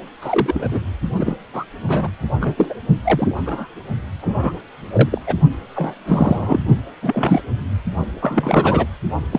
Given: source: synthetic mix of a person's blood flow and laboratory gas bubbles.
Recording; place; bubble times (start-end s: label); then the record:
Doppler ultrasound of blood flow; precordium
0.21-0.79 s: bubbles
1.19-1.35 s: bubbles
1.53-1.64 s: bubbles
1.87-2.10 s: bubbles
2.40-2.54 s: bubbles
2.57-2.74 s: bubbles
3.04-3.39 s: bubbles
3.45-3.67 s: bubbles
4.21-4.53 s: bubbles
4.92-5.09 s: bubbles
5.12-5.18 s: bubbles
5.27-5.36 s: bubbles
5.74-6.60 s: bubbles
7.02-7.40 s: bubbles
8.21-8.86 s: bubbles
9.32-9.39 s: bubbles
From the record:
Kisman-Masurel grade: 232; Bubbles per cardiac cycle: several, 3 to 8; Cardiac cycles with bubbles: 50 to 99%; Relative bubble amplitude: moderate (0.250 to 0.450); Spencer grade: 3 (all of the cardiac periods contain showers or single bubble signals, but not dominating or overriding the cardiac motion signals); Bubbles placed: only in the low amplitude regions of the cardiac cycle